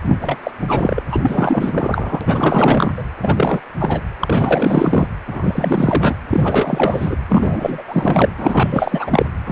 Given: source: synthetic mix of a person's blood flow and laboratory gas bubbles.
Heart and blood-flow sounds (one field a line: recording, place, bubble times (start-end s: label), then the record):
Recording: Doppler ultrasound of blood flow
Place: precordium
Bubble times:
0.01-0.51 s: bubbles
0.61-1.01 s: bubbles
1.10-2.92 s: bubbles
2.97-3.04 s: bubbles
3.22-3.62 s: bubbles
3.79-4.01 s: bubbles
4.21-5.07 s: bubbles
5.27-6.15 s: bubbles
6.27-7.17 s: bubbles
7.29-7.84 s: bubbles
7.88-8.29 s: bubbles
8.37-9.26 s: bubbles
9.46-9.52 s: bubbles
From the record:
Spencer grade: 4 (maximum detectable bubble signal sounding continuously throughout systole and diastole of every cardiac period, and overriding the amplitude of the normal cardiac signals)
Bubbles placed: anywhere in the cardiac cycle